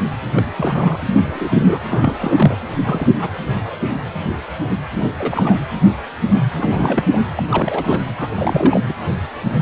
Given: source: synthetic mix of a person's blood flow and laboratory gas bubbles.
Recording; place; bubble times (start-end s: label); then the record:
Doppler ultrasound of blood flow; precordium
0.36-0.42 s: bubbles
0.56-0.99 s: bubbles
1.06-1.81 s: bubbles
1.90-2.56 s: bubbles
2.73-3.15 s: bubbles
3.21-3.29 s: bubbles
4.96-5.09 s: bubbles
5.19-5.58 s: bubbles
6.57-7.04 s: bubbles
7.12-7.24 s: bubbles
7.37-8.01 s: bubbles
8.19-8.28 s: bubbles
8.30-8.81 s: bubbles
8.84-8.94 s: bubbles
From the record:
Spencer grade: 3 (all of the cardiac periods contain showers or single bubble signals, but not dominating or overriding the cardiac motion signals); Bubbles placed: anywhere in the cardiac cycle